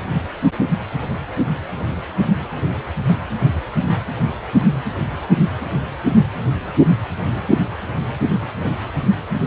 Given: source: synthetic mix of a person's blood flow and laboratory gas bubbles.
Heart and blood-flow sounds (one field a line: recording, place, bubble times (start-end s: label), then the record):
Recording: Doppler ultrasound of blood flow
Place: precordium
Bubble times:
no bubbles
From the record:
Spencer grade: 0 (complete lack of bubble signals)